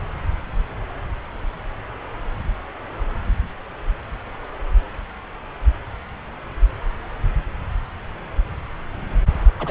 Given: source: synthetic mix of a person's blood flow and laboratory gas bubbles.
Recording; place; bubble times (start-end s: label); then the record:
Doppler ultrasound of blood flow; subclavian vein
9.59-9.71 s: bubbles
From the record:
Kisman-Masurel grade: 211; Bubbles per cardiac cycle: several, 3 to 8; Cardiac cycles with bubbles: 1 to 10%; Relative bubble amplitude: barely perceptible (0.100 to 0.250); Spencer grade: 1 (occasional bubble signal discernible with the cardiac motion signal, with majority of cardiac periods free of bubbles); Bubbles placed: anywhere in the cardiac cycle